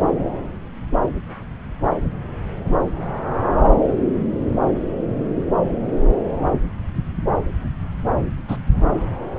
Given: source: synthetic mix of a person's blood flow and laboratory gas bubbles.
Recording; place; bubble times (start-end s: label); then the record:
Doppler ultrasound of blood flow; subclavian vein
8.48-8.57 s: bubbles
From the record:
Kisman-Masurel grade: 113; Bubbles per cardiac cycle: 1 to 2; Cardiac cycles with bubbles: 1 to 10%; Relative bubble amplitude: loud (0.450 to 0.775); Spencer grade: 1 (occasional bubble signal discernible with the cardiac motion signal, with majority of cardiac periods free of bubbles); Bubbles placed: anywhere in the cardiac cycle